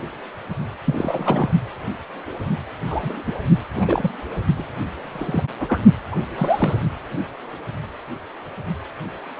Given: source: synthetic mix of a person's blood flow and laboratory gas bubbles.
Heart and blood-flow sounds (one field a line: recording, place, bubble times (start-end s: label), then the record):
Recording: Doppler ultrasound of blood flow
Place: precordium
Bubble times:
0.85-1.52 s: bubbles
2.90-3.34 s: bubbles
3.74-4.11 s: bubbles
4.58-4.64 s: bubbles
5.12-5.44 s: bubbles
5.59-5.80 s: bubbles
6.10-6.16 s: bubbles
6.38-6.82 s: bubbles
From the record:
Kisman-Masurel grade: 222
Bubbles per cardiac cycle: several, 3 to 8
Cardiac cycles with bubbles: 10 to 50%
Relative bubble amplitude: moderate (0.250 to 0.450)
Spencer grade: 2 (many but less than half of the cardiac periods contain bubble signals, singularly or in groups)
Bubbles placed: only in the low amplitude regions of the cardiac cycle